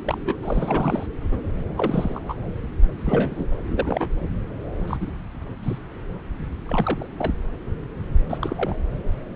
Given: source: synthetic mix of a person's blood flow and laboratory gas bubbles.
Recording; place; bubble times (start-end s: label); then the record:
Doppler ultrasound of blood flow; subclavian vein
0.04-0.36 s: bubbles
0.42-1.06 s: bubbles
1.31-1.41 s: bubbles
1.77-2.19 s: bubbles
2.28-2.34 s: bubbles
3.04-3.46 s: bubbles
3.70-4.08 s: bubbles
4.87-4.97 s: bubbles
5.00-5.10 s: bubbles
5.62-5.78 s: bubbles
6.66-7.06 s: bubbles
7.17-7.33 s: bubbles
8.29-8.38 s: bubbles
8.41-8.76 s: bubbles
From the record:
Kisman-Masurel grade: 232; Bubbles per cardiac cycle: several, 3 to 8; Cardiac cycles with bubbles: 50 to 99%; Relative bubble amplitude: moderate (0.250 to 0.450); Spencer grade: 3 (all of the cardiac periods contain showers or single bubble signals, but not dominating or overriding the cardiac motion signals); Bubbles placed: anywhere in the cardiac cycle